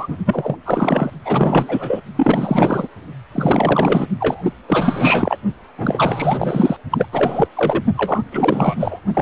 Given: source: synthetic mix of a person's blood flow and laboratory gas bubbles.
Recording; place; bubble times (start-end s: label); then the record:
Doppler ultrasound of blood flow; precordium
0.00-0.17 s: bubbles
0.26-0.56 s: bubbles
0.65-1.10 s: bubbles
1.24-2.01 s: bubbles
2.16-2.88 s: bubbles
3.32-4.08 s: bubbles
4.19-4.52 s: bubbles
4.67-5.37 s: bubbles
5.77-6.76 s: bubbles
6.90-7.06 s: bubbles
7.12-7.47 s: bubbles
7.55-7.83 s: bubbles
7.95-8.22 s: bubbles
8.31-9.01 s: bubbles
9.14-9.22 s: bubbles
From the record:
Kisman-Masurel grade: 444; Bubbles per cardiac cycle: continuous sound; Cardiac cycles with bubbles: 100%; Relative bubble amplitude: maximal (0.775 to 0.999); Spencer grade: 4 (maximum detectable bubble signal sounding continuously throughout systole and diastole of every cardiac period, and overriding the amplitude of the normal cardiac signals); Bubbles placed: only in the low amplitude regions of the cardiac cycle